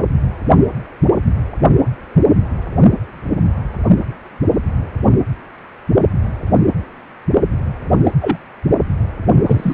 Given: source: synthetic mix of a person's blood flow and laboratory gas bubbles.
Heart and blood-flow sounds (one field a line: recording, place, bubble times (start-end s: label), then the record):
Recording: Doppler ultrasound of blood flow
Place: precordium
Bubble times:
8.04-8.12 s: bubbles
8.21-8.38 s: bubbles
9.46-9.73 s: bubbles
From the record:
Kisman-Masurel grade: 123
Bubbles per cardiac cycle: 1 to 2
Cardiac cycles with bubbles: 10 to 50%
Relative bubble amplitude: loud (0.450 to 0.775)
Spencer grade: 2 (many but less than half of the cardiac periods contain bubble signals, singularly or in groups)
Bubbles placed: only in the low amplitude regions of the cardiac cycle